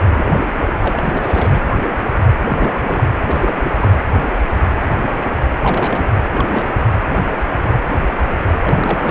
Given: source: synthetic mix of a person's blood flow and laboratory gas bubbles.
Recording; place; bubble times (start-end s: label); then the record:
Doppler ultrasound of blood flow; precordium
0.14-0.46 s: bubbles
0.53-1.62 s: bubbles
2.46-3.04 s: bubbles
3.27-3.96 s: bubbles
5.61-6.15 s: bubbles
6.33-6.90 s: bubbles
8.61-9.11 s: bubbles
From the record:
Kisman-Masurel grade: 332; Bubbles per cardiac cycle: rolling drumbeat, 9 or more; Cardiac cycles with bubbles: 50 to 99%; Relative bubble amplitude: moderate (0.250 to 0.450); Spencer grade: 3 (all of the cardiac periods contain showers or single bubble signals, but not dominating or overriding the cardiac motion signals); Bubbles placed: anywhere in the cardiac cycle